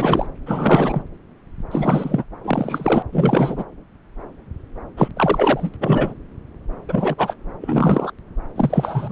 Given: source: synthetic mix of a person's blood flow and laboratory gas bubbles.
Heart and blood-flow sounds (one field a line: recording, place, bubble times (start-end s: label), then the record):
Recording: Doppler ultrasound of blood flow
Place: subclavian vein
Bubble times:
0.00-0.27 s: bubbles
0.46-1.03 s: bubbles
1.71-2.24 s: bubbles
2.44-3.03 s: bubbles
3.12-3.64 s: bubbles
4.96-5.08 s: bubbles
5.16-5.70 s: bubbles
5.74-5.77 s: bubbles
5.80-6.14 s: bubbles
6.88-7.15 s: bubbles
7.18-7.35 s: bubbles
7.61-8.12 s: bubbles
8.56-9.12 s: bubbles
From the record:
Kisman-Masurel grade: 333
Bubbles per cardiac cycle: rolling drumbeat, 9 or more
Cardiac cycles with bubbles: 50 to 99%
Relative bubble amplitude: loud (0.450 to 0.775)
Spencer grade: 3 (all of the cardiac periods contain showers or single bubble signals, but not dominating or overriding the cardiac motion signals)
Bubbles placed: anywhere in the cardiac cycle